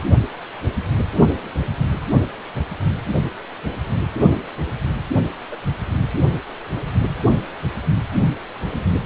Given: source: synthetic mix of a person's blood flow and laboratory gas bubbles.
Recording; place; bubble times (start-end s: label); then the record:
Doppler ultrasound of blood flow; precordium
5.51-5.56 s: bubbles
From the record:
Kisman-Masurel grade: 111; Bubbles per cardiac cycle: 1 to 2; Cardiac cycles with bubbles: 1 to 10%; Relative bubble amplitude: barely perceptible (0.100 to 0.250); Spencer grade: 1 (occasional bubble signal discernible with the cardiac motion signal, with majority of cardiac periods free of bubbles); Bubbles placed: anywhere in the cardiac cycle